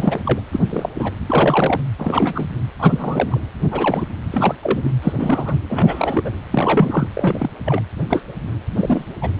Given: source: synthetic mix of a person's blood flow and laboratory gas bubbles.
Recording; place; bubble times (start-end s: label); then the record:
Doppler ultrasound of blood flow; precordium
0.00-0.23 s: bubbles
0.26-0.40 s: bubbles
0.53-0.59 s: bubbles
0.69-0.89 s: bubbles
0.99-1.12 s: bubbles
1.27-1.81 s: bubbles
1.98-2.49 s: bubbles
2.78-3.40 s: bubbles
3.71-4.05 s: bubbles
4.31-4.54 s: bubbles
4.62-4.89 s: bubbles
5.02-5.13 s: bubbles
5.16-5.55 s: bubbles
5.69-6.30 s: bubbles
6.50-7.08 s: bubbles
7.13-7.50 s: bubbles
7.64-7.81 s: bubbles
8.09-8.23 s: bubbles
8.71-9.04 s: bubbles
9.21-9.30 s: bubbles
From the record:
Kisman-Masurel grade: 242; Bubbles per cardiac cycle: several, 3 to 8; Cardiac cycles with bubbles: 100%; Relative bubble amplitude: moderate (0.250 to 0.450); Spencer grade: 3 (all of the cardiac periods contain showers or single bubble signals, but not dominating or overriding the cardiac motion signals); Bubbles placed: anywhere in the cardiac cycle